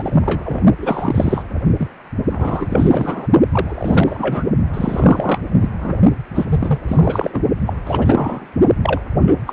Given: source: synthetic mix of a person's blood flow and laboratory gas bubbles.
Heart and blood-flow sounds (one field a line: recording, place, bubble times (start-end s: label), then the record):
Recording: Doppler ultrasound of blood flow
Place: precordium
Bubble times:
0.00-0.62 s: bubbles
0.79-1.44 s: bubbles
1.77-1.88 s: bubbles
2.29-3.27 s: bubbles
3.50-4.44 s: bubbles
4.74-5.39 s: bubbles
5.62-5.69 s: bubbles
5.80-5.98 s: bubbles
6.34-6.46 s: bubbles
6.49-6.79 s: bubbles
6.88-7.40 s: bubbles
7.66-7.74 s: bubbles
7.84-8.47 s: bubbles
8.83-9.01 s: bubbles
9.21-9.36 s: bubbles
9.47-9.53 s: bubbles
From the record:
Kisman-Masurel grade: 343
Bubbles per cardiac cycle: rolling drumbeat, 9 or more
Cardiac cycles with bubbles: 100%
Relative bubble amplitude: loud (0.450 to 0.775)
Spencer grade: 3 (all of the cardiac periods contain showers or single bubble signals, but not dominating or overriding the cardiac motion signals)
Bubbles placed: only in the low amplitude regions of the cardiac cycle